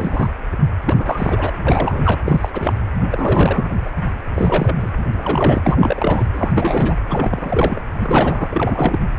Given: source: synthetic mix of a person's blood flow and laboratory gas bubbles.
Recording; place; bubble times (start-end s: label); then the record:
Doppler ultrasound of blood flow; precordium
0.00-0.31 s: bubbles
0.86-0.95 s: bubbles
0.98-1.52 s: bubbles
1.67-2.19 s: bubbles
2.25-2.50 s: bubbles
2.53-2.73 s: bubbles
3.11-3.78 s: bubbles
3.85-3.89 s: bubbles
4.34-4.91 s: bubbles
5.13-5.62 s: bubbles
5.65-6.26 s: bubbles
6.33-6.96 s: bubbles
7.08-7.81 s: bubbles
7.92-8.48 s: bubbles
8.51-9.08 s: bubbles
From the record:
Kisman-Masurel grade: 342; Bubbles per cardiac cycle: rolling drumbeat, 9 or more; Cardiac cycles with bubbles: 100%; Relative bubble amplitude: moderate (0.250 to 0.450); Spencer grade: 3 (all of the cardiac periods contain showers or single bubble signals, but not dominating or overriding the cardiac motion signals); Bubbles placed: anywhere in the cardiac cycle